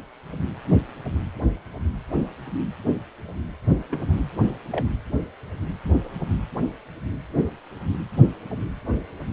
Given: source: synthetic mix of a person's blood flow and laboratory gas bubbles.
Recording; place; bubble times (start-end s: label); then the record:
Doppler ultrasound of blood flow; precordium
3.91-4.22 s: bubbles
4.71-4.85 s: bubbles
From the record:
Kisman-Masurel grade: 111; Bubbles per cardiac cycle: 1 to 2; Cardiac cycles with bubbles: 1 to 10%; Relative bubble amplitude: barely perceptible (0.100 to 0.250); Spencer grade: 1 (occasional bubble signal discernible with the cardiac motion signal, with majority of cardiac periods free of bubbles); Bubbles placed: anywhere in the cardiac cycle